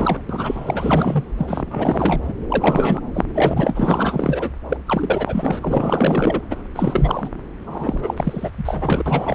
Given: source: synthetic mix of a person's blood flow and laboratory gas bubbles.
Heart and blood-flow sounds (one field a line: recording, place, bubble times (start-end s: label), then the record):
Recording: Doppler ultrasound of blood flow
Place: subclavian vein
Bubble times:
0.00-0.22 s: bubbles
0.29-1.24 s: bubbles
1.37-2.33 s: bubbles
2.48-3.00 s: bubbles
3.13-3.25 s: bubbles
3.34-4.50 s: bubbles
4.69-4.77 s: bubbles
4.87-5.59 s: bubbles
5.62-6.42 s: bubbles
6.50-6.56 s: bubbles
6.75-7.29 s: bubbles
7.66-8.51 s: bubbles
8.57-9.35 s: bubbles
From the record:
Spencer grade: 4 (maximum detectable bubble signal sounding continuously throughout systole and diastole of every cardiac period, and overriding the amplitude of the normal cardiac signals)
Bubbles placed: anywhere in the cardiac cycle